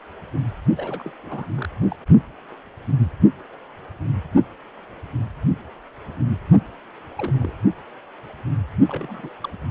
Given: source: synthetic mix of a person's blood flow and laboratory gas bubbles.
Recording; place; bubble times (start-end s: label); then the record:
Doppler ultrasound of blood flow; precordium
0.77-1.11 s: bubbles
1.24-1.45 s: bubbles
1.58-1.69 s: bubbles
1.82-1.88 s: bubbles
1.91-1.95 s: bubbles
7.17-7.53 s: bubbles
8.87-9.29 s: bubbles
9.44-9.48 s: bubbles
9.61-9.71 s: bubbles
From the record:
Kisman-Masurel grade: 221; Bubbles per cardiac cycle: several, 3 to 8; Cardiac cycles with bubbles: 10 to 50%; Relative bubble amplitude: barely perceptible (0.100 to 0.250); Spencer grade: 2 (many but less than half of the cardiac periods contain bubble signals, singularly or in groups); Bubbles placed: only in the low amplitude regions of the cardiac cycle